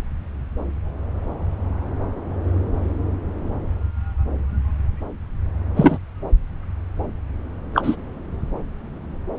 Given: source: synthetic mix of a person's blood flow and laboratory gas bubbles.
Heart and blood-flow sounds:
Doppler ultrasound of blood flow; subclavian vein
5.76-5.98 s: bubbles
7.74-7.96 s: bubbles
9.37-9.39 s: bubbles
From the record:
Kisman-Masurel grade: 123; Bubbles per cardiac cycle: 1 to 2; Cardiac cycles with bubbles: 10 to 50%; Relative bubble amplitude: loud (0.450 to 0.775); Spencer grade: 2 (many but less than half of the cardiac periods contain bubble signals, singularly or in groups); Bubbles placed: anywhere in the cardiac cycle

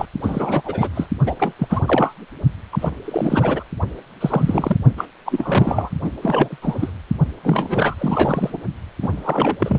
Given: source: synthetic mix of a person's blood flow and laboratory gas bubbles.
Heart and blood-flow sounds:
Doppler ultrasound of blood flow; precordium
0.00-0.06 s: bubbles
0.21-0.61 s: bubbles
0.64-0.89 s: bubbles
0.95-1.07 s: bubbles
1.26-1.35 s: bubbles
1.39-1.54 s: bubbles
1.58-1.82 s: bubbles
1.87-2.14 s: bubbles
2.72-2.91 s: bubbles
3.04-3.64 s: bubbles
4.21-4.77 s: bubbles
4.97-5.05 s: bubbles
5.25-5.90 s: bubbles
6.01-6.11 s: bubbles
6.21-6.58 s: bubbles
6.61-6.92 s: bubbles
7.43-7.95 s: bubbles
7.98-8.65 s: bubbles
9.02-9.57 s: bubbles
9.61-9.79 s: bubbles
From the record:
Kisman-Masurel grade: 343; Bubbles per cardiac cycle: rolling drumbeat, 9 or more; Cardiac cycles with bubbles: 100%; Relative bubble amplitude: loud (0.450 to 0.775); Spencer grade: 3 (all of the cardiac periods contain showers or single bubble signals, but not dominating or overriding the cardiac motion signals); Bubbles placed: only in the low amplitude regions of the cardiac cycle

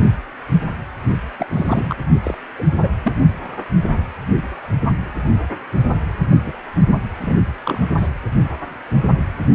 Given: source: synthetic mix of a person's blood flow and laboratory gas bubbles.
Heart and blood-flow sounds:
Doppler ultrasound of blood flow; precordium
1.39-1.95 s: bubbles
2.23-2.35 s: bubbles
2.58-2.64 s: bubbles
2.80-2.88 s: bubbles
3.03-3.12 s: bubbles
6.46-6.53 s: bubbles
7.17-7.39 s: bubbles
7.64-7.86 s: bubbles
7.97-8.07 s: bubbles
From the record:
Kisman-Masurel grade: 222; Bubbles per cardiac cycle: several, 3 to 8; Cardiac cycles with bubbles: 10 to 50%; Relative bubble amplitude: moderate (0.250 to 0.450); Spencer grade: 2 (many but less than half of the cardiac periods contain bubble signals, singularly or in groups); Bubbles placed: only in the low amplitude regions of the cardiac cycle

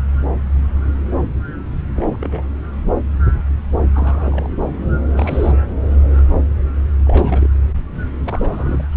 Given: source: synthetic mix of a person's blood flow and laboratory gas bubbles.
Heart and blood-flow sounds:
Doppler ultrasound of blood flow; subclavian vein
1.96-2.17 s: bubbles
2.20-2.44 s: bubbles
3.94-4.49 s: bubbles
5.16-5.52 s: bubbles
7.06-7.48 s: bubbles
8.24-8.85 s: bubbles
From the record:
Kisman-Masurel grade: 221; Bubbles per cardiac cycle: several, 3 to 8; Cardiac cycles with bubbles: 10 to 50%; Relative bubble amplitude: barely perceptible (0.100 to 0.250); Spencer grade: 2 (many but less than half of the cardiac periods contain bubble signals, singularly or in groups); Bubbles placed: anywhere in the cardiac cycle

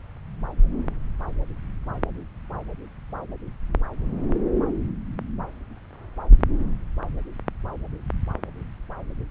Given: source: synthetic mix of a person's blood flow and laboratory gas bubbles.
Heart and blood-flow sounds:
Doppler ultrasound of blood flow; subclavian vein
no bubbles
From the record:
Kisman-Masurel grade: 000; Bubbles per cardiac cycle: 0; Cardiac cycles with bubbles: 0%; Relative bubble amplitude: no bubbles discernible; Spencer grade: 0 (complete lack of bubble signals)

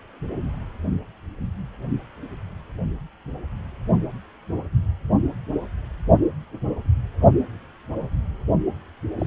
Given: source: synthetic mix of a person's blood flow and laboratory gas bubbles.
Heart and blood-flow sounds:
Doppler ultrasound of blood flow; precordium
9.20-9.27 s: bubbles
From the record:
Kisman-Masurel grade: 212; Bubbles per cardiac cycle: several, 3 to 8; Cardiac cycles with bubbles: 1 to 10%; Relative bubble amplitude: moderate (0.250 to 0.450); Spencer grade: 1 (occasional bubble signal discernible with the cardiac motion signal, with majority of cardiac periods free of bubbles); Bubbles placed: only in the low amplitude regions of the cardiac cycle

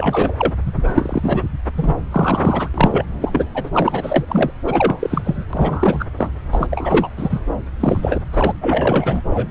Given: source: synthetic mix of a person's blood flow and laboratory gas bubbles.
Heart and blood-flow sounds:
Doppler ultrasound of blood flow; subclavian vein
0.00-0.53 s: bubbles
0.66-0.73 s: bubbles
0.83-0.89 s: bubbles
0.95-1.44 s: bubbles
1.76-1.95 s: bubbles
2.11-2.69 s: bubbles
2.74-3.05 s: bubbles
3.20-3.45 s: bubbles
3.54-3.69 s: bubbles
3.74-4.25 s: bubbles
4.28-4.50 s: bubbles
4.64-5.44 s: bubbles
5.53-6.05 s: bubbles
6.17-6.31 s: bubbles
6.51-7.09 s: bubbles
7.17-7.42 s: bubbles
7.79-8.20 s: bubbles
8.32-8.54 s: bubbles
8.61-9.21 s: bubbles
9.30-9.48 s: bubbles
From the record:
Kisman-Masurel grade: 333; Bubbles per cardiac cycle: rolling drumbeat, 9 or more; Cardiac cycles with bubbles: 50 to 99%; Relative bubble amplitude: loud (0.450 to 0.775); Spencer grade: 3 (all of the cardiac periods contain showers or single bubble signals, but not dominating or overriding the cardiac motion signals); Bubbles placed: anywhere in the cardiac cycle

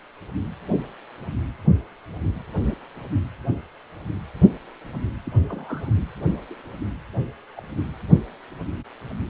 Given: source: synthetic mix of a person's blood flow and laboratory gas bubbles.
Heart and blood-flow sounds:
Doppler ultrasound of blood flow; precordium
2.67-2.75 s: bubbles
5.25-5.32 s: bubbles
5.50-5.92 s: bubbles
6.50-6.55 s: bubbles
7.57-7.61 s: bubbles
From the record:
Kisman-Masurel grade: 121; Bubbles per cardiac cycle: 1 to 2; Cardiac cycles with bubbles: 10 to 50%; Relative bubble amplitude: barely perceptible (0.100 to 0.250); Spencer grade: 2 (many but less than half of the cardiac periods contain bubble signals, singularly or in groups); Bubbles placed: anywhere in the cardiac cycle

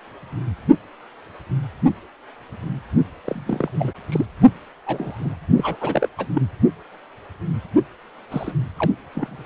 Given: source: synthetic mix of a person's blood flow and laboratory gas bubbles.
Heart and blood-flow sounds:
Doppler ultrasound of blood flow; precordium
3.25-3.73 s: bubbles
3.78-3.92 s: bubbles
4.08-4.25 s: bubbles
4.86-5.37 s: bubbles
5.56-5.77 s: bubbles
5.81-6.08 s: bubbles
6.17-6.27 s: bubbles
6.34-6.41 s: bubbles
8.31-8.53 s: bubbles
8.77-8.91 s: bubbles
9.15-9.45 s: bubbles
From the record:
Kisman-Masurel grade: 222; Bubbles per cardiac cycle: several, 3 to 8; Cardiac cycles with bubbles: 10 to 50%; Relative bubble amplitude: moderate (0.250 to 0.450); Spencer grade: 2 (many but less than half of the cardiac periods contain bubble signals, singularly or in groups); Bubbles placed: only in the low amplitude regions of the cardiac cycle

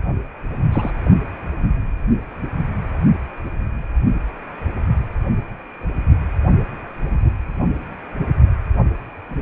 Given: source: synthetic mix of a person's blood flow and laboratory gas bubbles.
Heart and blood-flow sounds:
Doppler ultrasound of blood flow; precordium
0.72-0.91 s: bubbles
From the record:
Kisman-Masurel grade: 112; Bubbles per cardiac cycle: 1 to 2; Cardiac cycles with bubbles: 1 to 10%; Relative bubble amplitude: moderate (0.250 to 0.450); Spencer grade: 1 (occasional bubble signal discernible with the cardiac motion signal, with majority of cardiac periods free of bubbles); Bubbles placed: only in the low amplitude regions of the cardiac cycle

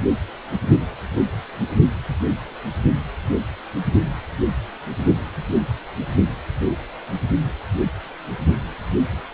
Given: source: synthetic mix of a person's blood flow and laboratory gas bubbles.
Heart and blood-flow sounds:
Doppler ultrasound of blood flow; precordium
no bubbles
From the record:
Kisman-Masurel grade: 000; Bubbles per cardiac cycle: 0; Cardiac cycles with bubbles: 0%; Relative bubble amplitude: no bubbles discernible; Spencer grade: 0 (complete lack of bubble signals)

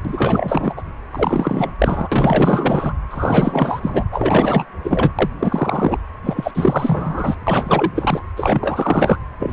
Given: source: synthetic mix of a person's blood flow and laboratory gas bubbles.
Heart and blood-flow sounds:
Doppler ultrasound of blood flow; precordium
0.04-0.74 s: bubbles
0.77-0.82 s: bubbles
1.11-1.74 s: bubbles
1.79-2.08 s: bubbles
2.11-2.93 s: bubbles
3.10-4.04 s: bubbles
4.12-4.65 s: bubbles
4.84-5.12 s: bubbles
5.19-5.30 s: bubbles
5.39-5.98 s: bubbles
6.24-6.51 s: bubbles
6.55-7.35 s: bubbles
7.47-7.92 s: bubbles
7.95-8.21 s: bubbles
8.36-9.19 s: bubbles
9.40-9.53 s: bubbles
From the record:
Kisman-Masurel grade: 444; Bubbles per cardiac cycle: continuous sound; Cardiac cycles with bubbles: 100%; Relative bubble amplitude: maximal (0.775 to 0.999); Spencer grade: 4 (maximum detectable bubble signal sounding continuously throughout systole and diastole of every cardiac period, and overriding the amplitude of the normal cardiac signals); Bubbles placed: anywhere in the cardiac cycle

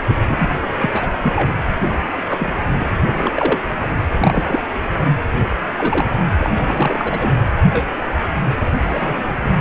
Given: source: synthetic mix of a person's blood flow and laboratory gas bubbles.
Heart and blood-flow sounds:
Doppler ultrasound of blood flow; precordium
0.09-0.20 s: bubbles
0.27-0.51 s: bubbles
0.82-0.89 s: bubbles
0.93-1.08 s: bubbles
1.23-1.56 s: bubbles
2.28-2.53 s: bubbles
2.79-2.90 s: bubbles
3.08-3.58 s: bubbles
3.82-3.88 s: bubbles
4.18-4.59 s: bubbles
5.76-6.06 s: bubbles
6.40-7.33 s: bubbles
7.69-7.85 s: bubbles
8.01-8.04 s: bubbles
8.82-9.37 s: bubbles
9.44-9.53 s: bubbles
From the record:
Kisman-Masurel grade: 242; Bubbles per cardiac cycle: several, 3 to 8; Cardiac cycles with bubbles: 100%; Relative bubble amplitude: moderate (0.250 to 0.450); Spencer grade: 3 (all of the cardiac periods contain showers or single bubble signals, but not dominating or overriding the cardiac motion signals); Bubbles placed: anywhere in the cardiac cycle

